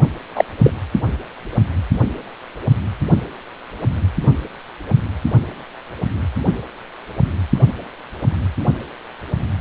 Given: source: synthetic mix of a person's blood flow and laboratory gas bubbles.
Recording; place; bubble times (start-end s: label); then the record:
Doppler ultrasound of blood flow; precordium
0.35-0.45 s: bubbles
0.64-0.71 s: bubbles
From the record:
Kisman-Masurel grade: 213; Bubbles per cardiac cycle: several, 3 to 8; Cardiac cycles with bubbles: 1 to 10%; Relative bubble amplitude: loud (0.450 to 0.775); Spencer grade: 1 (occasional bubble signal discernible with the cardiac motion signal, with majority of cardiac periods free of bubbles); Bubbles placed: anywhere in the cardiac cycle